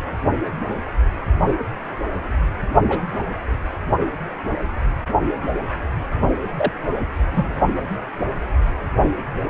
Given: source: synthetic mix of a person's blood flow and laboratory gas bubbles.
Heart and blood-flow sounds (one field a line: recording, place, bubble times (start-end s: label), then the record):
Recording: Doppler ultrasound of blood flow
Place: precordium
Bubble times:
2.88-3.00 s: bubbles
6.58-6.72 s: bubbles
7.30-7.50 s: bubbles
From the record:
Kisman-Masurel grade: 122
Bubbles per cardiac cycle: 1 to 2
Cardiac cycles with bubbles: 10 to 50%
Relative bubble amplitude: moderate (0.250 to 0.450)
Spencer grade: 2 (many but less than half of the cardiac periods contain bubble signals, singularly or in groups)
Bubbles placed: only in the low amplitude regions of the cardiac cycle